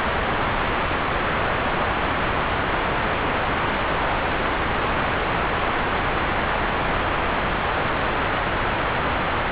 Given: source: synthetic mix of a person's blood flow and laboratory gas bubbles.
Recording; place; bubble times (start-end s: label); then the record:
Doppler ultrasound of blood flow; subclavian vein
no bubbles
From the record:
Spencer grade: 0 (complete lack of bubble signals)